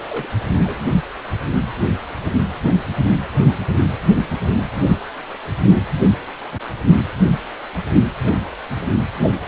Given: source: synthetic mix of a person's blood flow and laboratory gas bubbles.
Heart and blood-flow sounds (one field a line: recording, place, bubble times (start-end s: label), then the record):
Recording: Doppler ultrasound of blood flow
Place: precordium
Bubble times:
0.09-0.29 s: bubbles
0.64-0.81 s: bubbles
8.24-8.34 s: bubbles
From the record:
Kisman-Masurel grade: 121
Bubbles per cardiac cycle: 1 to 2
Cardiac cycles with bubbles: 10 to 50%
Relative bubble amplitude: barely perceptible (0.100 to 0.250)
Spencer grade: 2 (many but less than half of the cardiac periods contain bubble signals, singularly or in groups)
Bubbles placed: only in the low amplitude regions of the cardiac cycle